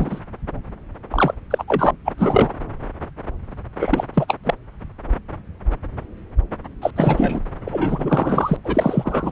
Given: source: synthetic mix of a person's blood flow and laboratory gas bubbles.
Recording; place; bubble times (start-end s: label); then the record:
Doppler ultrasound of blood flow; subclavian vein
0.00-0.20 s: bubbles
1.10-1.34 s: bubbles
1.50-1.64 s: bubbles
1.68-1.91 s: bubbles
2.04-2.12 s: bubbles
2.18-2.53 s: bubbles
3.80-4.04 s: bubbles
4.13-4.34 s: bubbles
4.43-4.54 s: bubbles
6.81-6.90 s: bubbles
6.96-7.40 s: bubbles
7.64-8.56 s: bubbles
8.64-9.31 s: bubbles
From the record:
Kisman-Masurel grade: 333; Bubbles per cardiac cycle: rolling drumbeat, 9 or more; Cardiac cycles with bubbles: 50 to 99%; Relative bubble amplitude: loud (0.450 to 0.775); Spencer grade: 3 (all of the cardiac periods contain showers or single bubble signals, but not dominating or overriding the cardiac motion signals); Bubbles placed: anywhere in the cardiac cycle